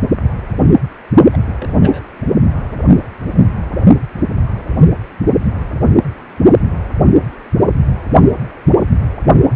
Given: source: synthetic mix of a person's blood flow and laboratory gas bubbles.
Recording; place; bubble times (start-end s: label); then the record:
Doppler ultrasound of blood flow; precordium
1.32-1.38 s: bubbles
1.60-2.00 s: bubbles
From the record:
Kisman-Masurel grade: 111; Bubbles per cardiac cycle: 1 to 2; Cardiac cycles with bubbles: 1 to 10%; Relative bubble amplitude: barely perceptible (0.100 to 0.250); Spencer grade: 1 (occasional bubble signal discernible with the cardiac motion signal, with majority of cardiac periods free of bubbles); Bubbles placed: only in the low amplitude regions of the cardiac cycle